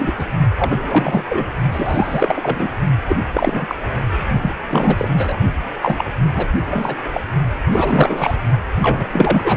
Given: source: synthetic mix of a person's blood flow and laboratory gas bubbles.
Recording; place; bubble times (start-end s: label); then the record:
Doppler ultrasound of blood flow; precordium
0.00-0.11 s: bubbles
0.18-0.26 s: bubbles
0.58-1.24 s: bubbles
1.29-1.48 s: bubbles
1.72-2.69 s: bubbles
3.07-3.16 s: bubbles
3.33-3.75 s: bubbles
4.42-4.53 s: bubbles
4.69-5.08 s: bubbles
5.12-5.36 s: bubbles
5.82-6.05 s: bubbles
6.35-6.46 s: bubbles
6.65-6.96 s: bubbles
7.11-7.20 s: bubbles
7.71-8.38 s: bubbles
8.82-9.56 s: bubbles
From the record:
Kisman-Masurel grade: 343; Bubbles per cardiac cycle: rolling drumbeat, 9 or more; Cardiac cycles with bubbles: 100%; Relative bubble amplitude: loud (0.450 to 0.775); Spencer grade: 3 (all of the cardiac periods contain showers or single bubble signals, but not dominating or overriding the cardiac motion signals); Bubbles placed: only in the low amplitude regions of the cardiac cycle